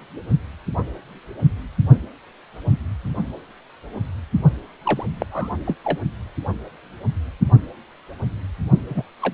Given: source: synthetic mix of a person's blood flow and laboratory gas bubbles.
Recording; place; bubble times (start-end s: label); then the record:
Doppler ultrasound of blood flow; precordium
4.83-5.04 s: bubbles
5.18-5.26 s: bubbles
5.32-5.49 s: bubbles
5.66-5.75 s: bubbles
5.84-5.99 s: bubbles
8.89-9.04 s: bubbles
9.22-9.34 s: bubbles
From the record:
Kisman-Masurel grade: 222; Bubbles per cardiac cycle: several, 3 to 8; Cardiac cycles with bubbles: 10 to 50%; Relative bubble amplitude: moderate (0.250 to 0.450); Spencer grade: 2 (many but less than half of the cardiac periods contain bubble signals, singularly or in groups); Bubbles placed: only in the low amplitude regions of the cardiac cycle